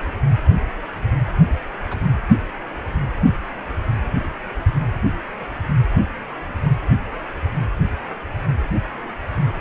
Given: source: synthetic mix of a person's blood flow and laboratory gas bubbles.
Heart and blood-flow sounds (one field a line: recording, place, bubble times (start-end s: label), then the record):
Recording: Doppler ultrasound of blood flow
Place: precordium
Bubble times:
1.91-1.98 s: bubbles
From the record:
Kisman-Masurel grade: 111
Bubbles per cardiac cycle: 1 to 2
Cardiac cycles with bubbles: 1 to 10%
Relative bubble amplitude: barely perceptible (0.100 to 0.250)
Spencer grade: 1 (occasional bubble signal discernible with the cardiac motion signal, with majority of cardiac periods free of bubbles)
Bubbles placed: anywhere in the cardiac cycle